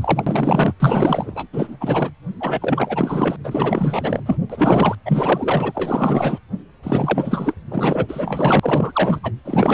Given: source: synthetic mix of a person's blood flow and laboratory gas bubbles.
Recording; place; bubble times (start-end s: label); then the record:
Doppler ultrasound of blood flow; precordium
0.01-0.74 s: bubbles
0.80-1.47 s: bubbles
1.53-1.77 s: bubbles
1.80-2.10 s: bubbles
2.40-3.36 s: bubbles
3.44-4.37 s: bubbles
4.50-4.95 s: bubbles
5.05-6.39 s: bubbles
6.83-7.54 s: bubbles
7.71-9.20 s: bubbles
9.23-9.33 s: bubbles
9.44-9.74 s: bubbles
From the record:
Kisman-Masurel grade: 444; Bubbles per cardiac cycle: continuous sound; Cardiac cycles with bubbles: 100%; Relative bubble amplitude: maximal (0.775 to 0.999); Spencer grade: 4 (maximum detectable bubble signal sounding continuously throughout systole and diastole of every cardiac period, and overriding the amplitude of the normal cardiac signals); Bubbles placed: anywhere in the cardiac cycle